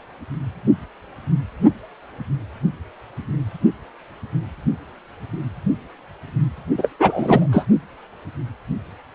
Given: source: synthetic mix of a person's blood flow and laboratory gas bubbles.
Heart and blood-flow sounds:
Doppler ultrasound of blood flow; precordium
6.77-6.89 s: bubbles
6.99-7.47 s: bubbles
7.52-7.65 s: bubbles
From the record:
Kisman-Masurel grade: 223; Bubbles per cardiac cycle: several, 3 to 8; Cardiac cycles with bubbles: 10 to 50%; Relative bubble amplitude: loud (0.450 to 0.775); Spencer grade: 2 (many but less than half of the cardiac periods contain bubble signals, singularly or in groups); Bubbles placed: only in the low amplitude regions of the cardiac cycle

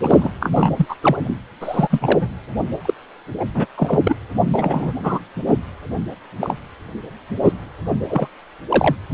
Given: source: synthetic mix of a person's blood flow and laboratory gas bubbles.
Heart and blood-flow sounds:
Doppler ultrasound of blood flow; precordium
0.02-0.30 s: bubbles
0.39-0.86 s: bubbles
0.89-0.95 s: bubbles
1.02-1.17 s: bubbles
1.24-1.35 s: bubbles
1.60-2.29 s: bubbles
2.85-2.94 s: bubbles
3.40-3.45 s: bubbles
3.54-3.66 s: bubbles
3.76-4.00 s: bubbles
4.05-4.15 s: bubbles
4.54-4.93 s: bubbles
5.03-5.20 s: bubbles
5.46-5.56 s: bubbles
6.41-6.55 s: bubbles
7.43-7.53 s: bubbles
8.08-8.28 s: bubbles
8.70-8.96 s: bubbles
From the record:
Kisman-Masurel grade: 243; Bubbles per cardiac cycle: several, 3 to 8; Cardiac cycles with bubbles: 100%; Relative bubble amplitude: loud (0.450 to 0.775); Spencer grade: 3 (all of the cardiac periods contain showers or single bubble signals, but not dominating or overriding the cardiac motion signals); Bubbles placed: anywhere in the cardiac cycle

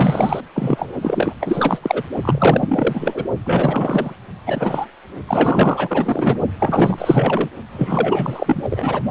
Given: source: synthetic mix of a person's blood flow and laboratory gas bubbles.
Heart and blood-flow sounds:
Doppler ultrasound of blood flow; precordium
0.00-0.41 s: bubbles
0.54-0.93 s: bubbles
1.02-1.35 s: bubbles
1.41-1.79 s: bubbles
1.82-2.03 s: bubbles
2.22-3.25 s: bubbles
3.43-4.14 s: bubbles
4.46-4.86 s: bubbles
5.27-6.40 s: bubbles
6.60-7.50 s: bubbles
7.72-9.01 s: bubbles
From the record:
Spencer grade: 4 (maximum detectable bubble signal sounding continuously throughout systole and diastole of every cardiac period, and overriding the amplitude of the normal cardiac signals); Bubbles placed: only in the low amplitude regions of the cardiac cycle

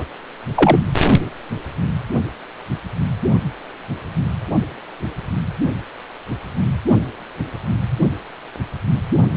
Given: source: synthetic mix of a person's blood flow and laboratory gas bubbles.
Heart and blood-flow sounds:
Doppler ultrasound of blood flow; precordium
0.00-0.03 s: bubbles
0.56-0.80 s: bubbles
From the record:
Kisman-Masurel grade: 213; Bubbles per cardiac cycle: several, 3 to 8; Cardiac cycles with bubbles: 1 to 10%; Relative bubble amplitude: loud (0.450 to 0.775); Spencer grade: 1 (occasional bubble signal discernible with the cardiac motion signal, with majority of cardiac periods free of bubbles); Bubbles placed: only in the low amplitude regions of the cardiac cycle

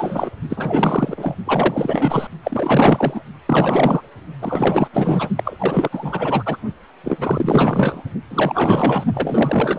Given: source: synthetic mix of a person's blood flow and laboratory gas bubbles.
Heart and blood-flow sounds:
Doppler ultrasound of blood flow; precordium
0.00-0.31 s: bubbles
0.49-1.35 s: bubbles
1.45-2.27 s: bubbles
2.44-3.23 s: bubbles
3.47-4.01 s: bubbles
4.42-4.88 s: bubbles
4.93-5.29 s: bubbles
5.35-5.89 s: bubbles
5.92-6.58 s: bubbles
7.04-7.17 s: bubbles
7.21-8.03 s: bubbles
8.31-9.04 s: bubbles
9.14-9.79 s: bubbles
From the record:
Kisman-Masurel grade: 444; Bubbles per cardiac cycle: continuous sound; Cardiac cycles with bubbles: 100%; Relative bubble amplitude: maximal (0.775 to 0.999); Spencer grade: 4 (maximum detectable bubble signal sounding continuously throughout systole and diastole of every cardiac period, and overriding the amplitude of the normal cardiac signals); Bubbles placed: only in the low amplitude regions of the cardiac cycle

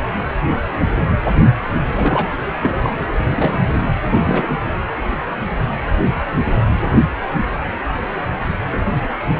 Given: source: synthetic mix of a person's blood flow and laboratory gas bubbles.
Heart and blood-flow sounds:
Doppler ultrasound of blood flow; precordium
1.94-2.31 s: bubbles
2.62-3.08 s: bubbles
3.33-3.70 s: bubbles
4.05-4.57 s: bubbles
From the record:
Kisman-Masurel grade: 222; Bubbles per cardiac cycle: several, 3 to 8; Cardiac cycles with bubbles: 10 to 50%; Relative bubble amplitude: moderate (0.250 to 0.450); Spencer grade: 2 (many but less than half of the cardiac periods contain bubble signals, singularly or in groups); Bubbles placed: anywhere in the cardiac cycle

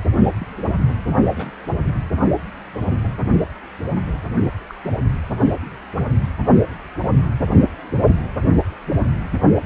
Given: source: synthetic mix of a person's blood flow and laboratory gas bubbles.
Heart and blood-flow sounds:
Doppler ultrasound of blood flow; precordium
0.40-0.69 s: bubbles
1.34-1.51 s: bubbles
4.69-4.74 s: bubbles
4.84-4.91 s: bubbles
7.00-7.08 s: bubbles
From the record:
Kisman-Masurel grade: 121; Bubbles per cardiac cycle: 1 to 2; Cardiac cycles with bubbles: 10 to 50%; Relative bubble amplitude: barely perceptible (0.100 to 0.250); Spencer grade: 2 (many but less than half of the cardiac periods contain bubble signals, singularly or in groups); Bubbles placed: only in the low amplitude regions of the cardiac cycle

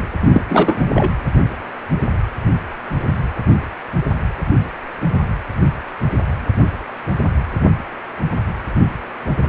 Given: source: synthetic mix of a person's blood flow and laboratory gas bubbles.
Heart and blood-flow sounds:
Doppler ultrasound of blood flow; precordium
0.33-0.42 s: bubbles
0.48-0.85 s: bubbles
0.95-1.11 s: bubbles
From the record:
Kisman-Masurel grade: 223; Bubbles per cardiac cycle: several, 3 to 8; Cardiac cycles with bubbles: 10 to 50%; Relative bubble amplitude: loud (0.450 to 0.775); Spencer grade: 2 (many but less than half of the cardiac periods contain bubble signals, singularly or in groups); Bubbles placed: anywhere in the cardiac cycle

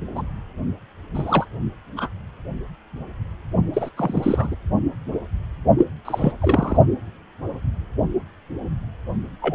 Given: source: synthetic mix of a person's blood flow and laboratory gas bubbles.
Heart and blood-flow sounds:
Doppler ultrasound of blood flow; precordium
0.15-0.22 s: bubbles
1.14-1.46 s: bubbles
1.96-2.09 s: bubbles
3.73-3.89 s: bubbles
3.96-4.55 s: bubbles
5.78-5.85 s: bubbles
6.04-6.33 s: bubbles
6.39-6.76 s: bubbles
9.42-9.55 s: bubbles
From the record:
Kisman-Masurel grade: 232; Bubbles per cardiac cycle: several, 3 to 8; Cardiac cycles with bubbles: 50 to 99%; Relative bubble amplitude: moderate (0.250 to 0.450); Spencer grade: 3 (all of the cardiac periods contain showers or single bubble signals, but not dominating or overriding the cardiac motion signals); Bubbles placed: only in the low amplitude regions of the cardiac cycle

